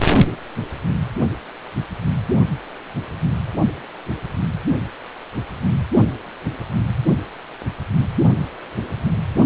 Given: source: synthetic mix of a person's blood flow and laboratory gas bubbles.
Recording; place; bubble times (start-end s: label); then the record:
Doppler ultrasound of blood flow; precordium
no bubbles
From the record:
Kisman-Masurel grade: 000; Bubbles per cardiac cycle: 0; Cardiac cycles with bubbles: 0%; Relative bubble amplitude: no bubbles discernible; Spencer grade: 0 (complete lack of bubble signals)